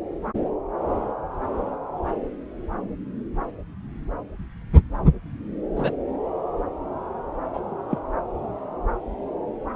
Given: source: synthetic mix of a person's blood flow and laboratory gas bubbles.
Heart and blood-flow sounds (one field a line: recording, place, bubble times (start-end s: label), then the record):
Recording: Doppler ultrasound of blood flow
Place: subclavian vein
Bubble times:
5.76-5.92 s: bubbles
7.54-7.60 s: bubbles
7.90-7.99 s: bubbles
From the record:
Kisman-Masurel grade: 112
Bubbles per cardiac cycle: 1 to 2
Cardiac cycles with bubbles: 1 to 10%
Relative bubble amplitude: moderate (0.250 to 0.450)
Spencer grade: 1 (occasional bubble signal discernible with the cardiac motion signal, with majority of cardiac periods free of bubbles)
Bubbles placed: anywhere in the cardiac cycle